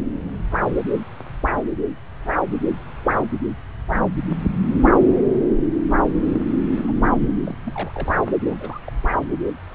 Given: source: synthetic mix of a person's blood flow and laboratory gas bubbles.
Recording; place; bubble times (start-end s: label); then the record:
Doppler ultrasound of blood flow; subclavian vein
6.33-6.55 s: bubbles
6.76-6.92 s: bubbles
7.05-7.10 s: bubbles
7.21-7.33 s: bubbles
7.44-7.62 s: bubbles
7.66-7.92 s: bubbles
7.94-8.16 s: bubbles
8.49-8.57 s: bubbles
8.61-8.79 s: bubbles
8.85-8.92 s: bubbles
From the record:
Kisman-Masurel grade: 221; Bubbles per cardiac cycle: several, 3 to 8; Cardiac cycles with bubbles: 10 to 50%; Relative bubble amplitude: barely perceptible (0.100 to 0.250); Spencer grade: 2 (many but less than half of the cardiac periods contain bubble signals, singularly or in groups); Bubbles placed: anywhere in the cardiac cycle